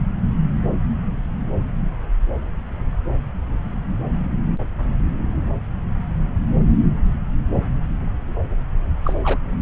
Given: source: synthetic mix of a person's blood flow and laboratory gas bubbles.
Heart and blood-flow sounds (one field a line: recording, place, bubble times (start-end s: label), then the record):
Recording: Doppler ultrasound of blood flow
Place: subclavian vein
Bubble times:
9.04-9.14 s: bubbles
9.23-9.39 s: bubbles
From the record:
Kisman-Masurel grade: 222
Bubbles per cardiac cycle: several, 3 to 8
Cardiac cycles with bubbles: 10 to 50%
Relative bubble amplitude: moderate (0.250 to 0.450)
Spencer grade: 2 (many but less than half of the cardiac periods contain bubble signals, singularly or in groups)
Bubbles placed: anywhere in the cardiac cycle